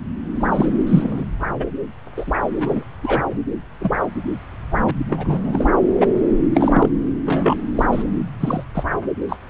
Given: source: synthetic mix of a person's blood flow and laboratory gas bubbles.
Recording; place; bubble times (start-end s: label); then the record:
Doppler ultrasound of blood flow; subclavian vein
0.35-0.49 s: bubbles
0.52-0.71 s: bubbles
0.86-1.24 s: bubbles
1.59-1.66 s: bubbles
2.17-2.32 s: bubbles
2.58-2.83 s: bubbles
3.02-3.25 s: bubbles
3.30-3.37 s: bubbles
3.79-3.96 s: bubbles
4.87-4.91 s: bubbles
5.08-5.67 s: bubbles
6.00-6.12 s: bubbles
6.54-6.89 s: bubbles
7.25-7.57 s: bubbles
7.76-7.83 s: bubbles
7.91-8.04 s: bubbles
8.40-8.64 s: bubbles
8.74-8.84 s: bubbles
9.29-9.37 s: bubbles
From the record:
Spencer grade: 3 (all of the cardiac periods contain showers or single bubble signals, but not dominating or overriding the cardiac motion signals); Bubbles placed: anywhere in the cardiac cycle